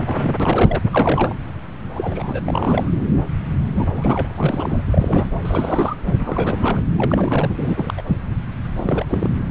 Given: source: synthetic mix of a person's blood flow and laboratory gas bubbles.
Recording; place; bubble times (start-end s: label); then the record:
Doppler ultrasound of blood flow; subclavian vein
0.00-0.36 s: bubbles
0.40-0.82 s: bubbles
0.91-1.36 s: bubbles
1.95-2.40 s: bubbles
2.43-2.91 s: bubbles
3.75-3.87 s: bubbles
3.94-4.82 s: bubbles
4.91-5.33 s: bubbles
5.41-5.96 s: bubbles
6.19-6.79 s: bubbles
6.98-7.94 s: bubbles
7.97-8.03 s: bubbles
8.76-9.05 s: bubbles
9.08-9.29 s: bubbles
9.46-9.50 s: bubbles
From the record:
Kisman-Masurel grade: 332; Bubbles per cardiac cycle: rolling drumbeat, 9 or more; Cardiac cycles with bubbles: 50 to 99%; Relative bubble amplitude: moderate (0.250 to 0.450); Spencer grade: 3 (all of the cardiac periods contain showers or single bubble signals, but not dominating or overriding the cardiac motion signals); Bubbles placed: anywhere in the cardiac cycle